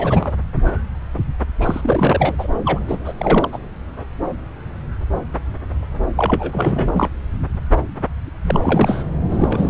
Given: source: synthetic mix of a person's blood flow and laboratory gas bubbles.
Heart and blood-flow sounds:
Doppler ultrasound of blood flow; subclavian vein
0.00-0.33 s: bubbles
1.60-2.35 s: bubbles
2.38-2.47 s: bubbles
2.65-2.79 s: bubbles
2.88-2.97 s: bubbles
3.04-3.13 s: bubbles
3.17-3.58 s: bubbles
6.15-7.10 s: bubbles
8.44-9.03 s: bubbles
9.31-9.70 s: bubbles
From the record:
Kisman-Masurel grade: 332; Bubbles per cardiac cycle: rolling drumbeat, 9 or more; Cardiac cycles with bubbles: 50 to 99%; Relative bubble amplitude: moderate (0.250 to 0.450); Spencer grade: 3 (all of the cardiac periods contain showers or single bubble signals, but not dominating or overriding the cardiac motion signals); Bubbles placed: anywhere in the cardiac cycle

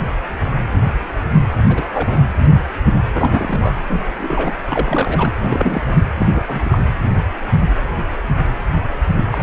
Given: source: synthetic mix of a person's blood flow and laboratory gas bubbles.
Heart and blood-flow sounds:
Doppler ultrasound of blood flow; precordium
1.68-1.83 s: bubbles
1.92-2.29 s: bubbles
3.13-3.78 s: bubbles
3.88-4.13 s: bubbles
4.18-4.51 s: bubbles
4.63-5.31 s: bubbles
5.40-5.93 s: bubbles
6.17-6.26 s: bubbles
6.32-6.43 s: bubbles
6.47-6.78 s: bubbles
9.31-9.43 s: bubbles
From the record:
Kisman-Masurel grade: 232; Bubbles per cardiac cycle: several, 3 to 8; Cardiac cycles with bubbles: 50 to 99%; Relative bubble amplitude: moderate (0.250 to 0.450); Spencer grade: 3 (all of the cardiac periods contain showers or single bubble signals, but not dominating or overriding the cardiac motion signals); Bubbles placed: anywhere in the cardiac cycle

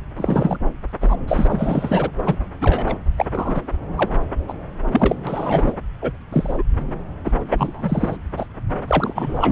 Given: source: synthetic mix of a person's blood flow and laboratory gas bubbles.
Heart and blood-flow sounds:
Doppler ultrasound of blood flow; subclavian vein
0.17-0.57 s: bubbles
1.01-1.17 s: bubbles
1.28-2.10 s: bubbles
2.25-2.35 s: bubbles
2.60-2.96 s: bubbles
3.17-3.25 s: bubbles
3.33-3.62 s: bubbles
3.96-4.15 s: bubbles
4.47-4.54 s: bubbles
4.91-5.16 s: bubbles
5.26-5.76 s: bubbles
6.01-6.12 s: bubbles
6.32-6.63 s: bubbles
7.24-7.32 s: bubbles
7.50-8.17 s: bubbles
8.37-8.46 s: bubbles
8.87-9.52 s: bubbles
From the record:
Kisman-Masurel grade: 243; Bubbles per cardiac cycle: several, 3 to 8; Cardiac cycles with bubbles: 100%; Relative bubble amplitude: loud (0.450 to 0.775); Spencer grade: 3 (all of the cardiac periods contain showers or single bubble signals, but not dominating or overriding the cardiac motion signals); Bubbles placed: anywhere in the cardiac cycle

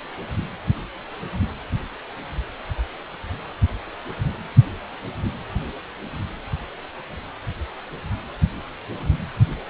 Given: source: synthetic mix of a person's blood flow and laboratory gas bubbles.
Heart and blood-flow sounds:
Doppler ultrasound of blood flow; precordium
no bubbles
From the record:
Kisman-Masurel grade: 000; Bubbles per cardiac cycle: 0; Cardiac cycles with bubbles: 0%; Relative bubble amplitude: no bubbles discernible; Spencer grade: 0 (complete lack of bubble signals)

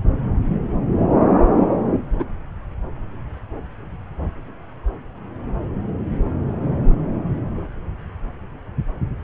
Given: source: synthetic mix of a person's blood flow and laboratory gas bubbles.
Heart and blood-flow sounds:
Doppler ultrasound of blood flow; subclavian vein
2.18-2.25 s: bubbles
From the record:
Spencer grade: 1 (occasional bubble signal discernible with the cardiac motion signal, with majority of cardiac periods free of bubbles); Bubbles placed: anywhere in the cardiac cycle

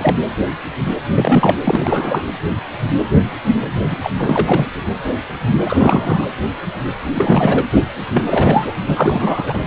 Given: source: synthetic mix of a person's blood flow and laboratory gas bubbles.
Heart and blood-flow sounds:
Doppler ultrasound of blood flow; precordium
0.00-0.16 s: bubbles
1.15-1.59 s: bubbles
1.64-2.25 s: bubbles
3.90-3.98 s: bubbles
4.02-4.11 s: bubbles
4.18-4.70 s: bubbles
5.66-6.27 s: bubbles
7.15-7.65 s: bubbles
8.14-8.74 s: bubbles
8.88-9.60 s: bubbles
From the record:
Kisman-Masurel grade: 333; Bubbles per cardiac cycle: rolling drumbeat, 9 or more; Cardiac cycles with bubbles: 50 to 99%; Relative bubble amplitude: loud (0.450 to 0.775); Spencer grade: 3 (all of the cardiac periods contain showers or single bubble signals, but not dominating or overriding the cardiac motion signals); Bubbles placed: anywhere in the cardiac cycle

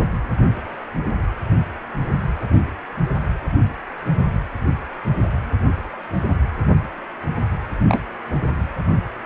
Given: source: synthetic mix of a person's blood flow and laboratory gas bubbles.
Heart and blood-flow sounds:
Doppler ultrasound of blood flow; precordium
7.88-8.02 s: bubbles
From the record:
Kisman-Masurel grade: 112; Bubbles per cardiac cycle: 1 to 2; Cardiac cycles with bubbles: 1 to 10%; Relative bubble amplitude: moderate (0.250 to 0.450); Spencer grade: 1 (occasional bubble signal discernible with the cardiac motion signal, with majority of cardiac periods free of bubbles); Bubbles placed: anywhere in the cardiac cycle

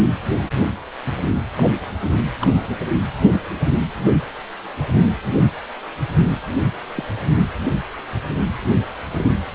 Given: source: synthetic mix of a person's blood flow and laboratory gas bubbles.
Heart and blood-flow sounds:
Doppler ultrasound of blood flow; precordium
0.37-0.46 s: bubbles
1.56-1.68 s: bubbles
2.39-2.51 s: bubbles
6.95-7.05 s: bubbles
9.12-9.30 s: bubbles
From the record:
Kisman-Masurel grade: 121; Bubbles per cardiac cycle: 1 to 2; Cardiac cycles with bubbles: 10 to 50%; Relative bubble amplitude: barely perceptible (0.100 to 0.250); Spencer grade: 2 (many but less than half of the cardiac periods contain bubble signals, singularly or in groups); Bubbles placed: only in the low amplitude regions of the cardiac cycle

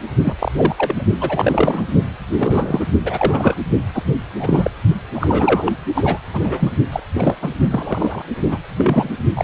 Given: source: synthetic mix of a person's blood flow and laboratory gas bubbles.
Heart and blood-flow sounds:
Doppler ultrasound of blood flow; precordium
0.23-0.34 s: bubbles
0.39-0.52 s: bubbles
0.57-0.75 s: bubbles
0.78-1.04 s: bubbles
1.20-1.90 s: bubbles
2.38-2.85 s: bubbles
3.03-3.55 s: bubbles
3.94-4.04 s: bubbles
4.39-4.71 s: bubbles
5.13-5.72 s: bubbles
5.95-6.18 s: bubbles
6.33-6.75 s: bubbles
6.92-7.00 s: bubbles
7.14-7.56 s: bubbles
7.71-8.22 s: bubbles
8.48-8.59 s: bubbles
8.75-9.10 s: bubbles
9.36-9.44 s: bubbles
From the record:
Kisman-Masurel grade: 243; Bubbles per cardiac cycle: several, 3 to 8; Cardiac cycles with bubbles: 100%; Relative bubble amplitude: loud (0.450 to 0.775); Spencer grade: 3 (all of the cardiac periods contain showers or single bubble signals, but not dominating or overriding the cardiac motion signals); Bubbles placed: only in the low amplitude regions of the cardiac cycle

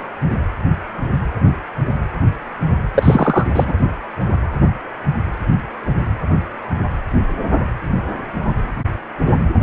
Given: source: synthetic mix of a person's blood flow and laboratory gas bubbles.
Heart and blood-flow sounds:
Doppler ultrasound of blood flow; precordium
2.94-3.45 s: bubbles
3.54-3.73 s: bubbles
From the record:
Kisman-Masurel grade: 213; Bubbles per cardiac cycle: several, 3 to 8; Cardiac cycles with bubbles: 1 to 10%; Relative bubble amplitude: loud (0.450 to 0.775); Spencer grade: 1 (occasional bubble signal discernible with the cardiac motion signal, with majority of cardiac periods free of bubbles); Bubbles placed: anywhere in the cardiac cycle

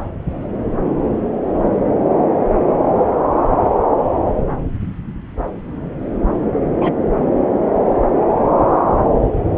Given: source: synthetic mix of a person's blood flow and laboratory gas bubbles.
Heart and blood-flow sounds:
Doppler ultrasound of blood flow; subclavian vein
6.76-6.92 s: bubbles
From the record:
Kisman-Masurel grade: 112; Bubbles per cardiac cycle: 1 to 2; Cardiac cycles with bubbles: 1 to 10%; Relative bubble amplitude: moderate (0.250 to 0.450); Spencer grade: 1 (occasional bubble signal discernible with the cardiac motion signal, with majority of cardiac periods free of bubbles); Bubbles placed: anywhere in the cardiac cycle

